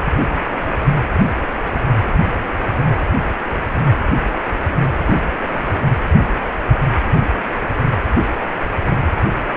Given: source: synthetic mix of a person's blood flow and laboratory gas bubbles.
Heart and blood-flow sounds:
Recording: Doppler ultrasound of blood flow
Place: precordium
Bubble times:
5.06-5.17 s: bubbles
5.47-5.60 s: bubbles
From the record:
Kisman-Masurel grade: 112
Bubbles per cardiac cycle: 1 to 2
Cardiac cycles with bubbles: 1 to 10%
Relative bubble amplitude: moderate (0.250 to 0.450)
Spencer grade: 1 (occasional bubble signal discernible with the cardiac motion signal, with majority of cardiac periods free of bubbles)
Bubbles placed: anywhere in the cardiac cycle

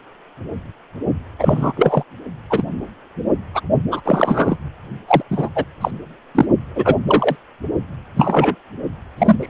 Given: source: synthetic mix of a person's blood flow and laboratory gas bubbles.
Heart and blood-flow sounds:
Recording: Doppler ultrasound of blood flow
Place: precordium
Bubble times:
1.38-1.73 s: bubbles
1.76-2.03 s: bubbles
2.49-2.63 s: bubbles
3.53-3.60 s: bubbles
3.91-4.00 s: bubbles
4.04-4.56 s: bubbles
5.08-5.22 s: bubbles
5.31-5.49 s: bubbles
5.55-5.64 s: bubbles
5.81-5.91 s: bubbles
6.35-6.46 s: bubbles
6.75-6.95 s: bubbles
7.07-7.36 s: bubbles
8.16-8.55 s: bubbles
9.18-9.36 s: bubbles
9.40-9.50 s: bubbles
From the record:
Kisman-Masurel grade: 233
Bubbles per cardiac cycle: several, 3 to 8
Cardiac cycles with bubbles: 50 to 99%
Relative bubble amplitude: loud (0.450 to 0.775)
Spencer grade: 3 (all of the cardiac periods contain showers or single bubble signals, but not dominating or overriding the cardiac motion signals)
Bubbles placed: only in the low amplitude regions of the cardiac cycle

